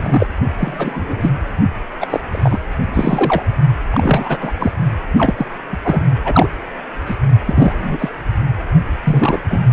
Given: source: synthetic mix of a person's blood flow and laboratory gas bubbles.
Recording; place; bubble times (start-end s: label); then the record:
Doppler ultrasound of blood flow; precordium
0.00-0.27 s: bubbles
0.58-1.29 s: bubbles
2.00-2.07 s: bubbles
2.10-2.21 s: bubbles
2.32-2.58 s: bubbles
2.93-3.42 s: bubbles
3.92-4.38 s: bubbles
4.40-4.55 s: bubbles
4.60-4.71 s: bubbles
5.17-5.34 s: bubbles
5.37-5.46 s: bubbles
5.72-5.78 s: bubbles
5.82-6.03 s: bubbles
6.24-6.48 s: bubbles
7.06-7.15 s: bubbles
7.45-8.09 s: bubbles
9.04-9.39 s: bubbles
9.49-9.62 s: bubbles
From the record:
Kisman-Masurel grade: 243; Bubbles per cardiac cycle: several, 3 to 8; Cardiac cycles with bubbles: 100%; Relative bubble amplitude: loud (0.450 to 0.775); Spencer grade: 3 (all of the cardiac periods contain showers or single bubble signals, but not dominating or overriding the cardiac motion signals); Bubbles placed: only in the low amplitude regions of the cardiac cycle